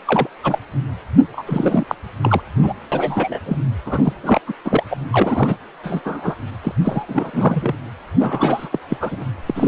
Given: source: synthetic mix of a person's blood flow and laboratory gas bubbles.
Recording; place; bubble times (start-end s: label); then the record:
Doppler ultrasound of blood flow; precordium
0.05-0.27 s: bubbles
0.43-0.58 s: bubbles
1.32-1.44 s: bubbles
1.47-1.85 s: bubbles
1.88-1.95 s: bubbles
2.22-2.41 s: bubbles
2.62-2.73 s: bubbles
2.92-3.40 s: bubbles
3.46-3.58 s: bubbles
3.85-4.13 s: bubbles
4.22-4.41 s: bubbles
4.47-4.53 s: bubbles
4.64-4.83 s: bubbles
4.90-5.02 s: bubbles
5.12-5.56 s: bubbles
5.83-6.01 s: bubbles
6.04-6.35 s: bubbles
6.63-6.72 s: bubbles
6.81-7.74 s: bubbles
8.20-8.69 s: bubbles
8.71-8.79 s: bubbles
8.89-8.97 s: bubbles
9.00-9.24 s: bubbles
9.47-9.68 s: bubbles
From the record:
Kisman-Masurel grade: 342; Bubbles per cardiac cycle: rolling drumbeat, 9 or more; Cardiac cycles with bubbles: 100%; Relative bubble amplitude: moderate (0.250 to 0.450); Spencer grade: 3 (all of the cardiac periods contain showers or single bubble signals, but not dominating or overriding the cardiac motion signals); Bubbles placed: anywhere in the cardiac cycle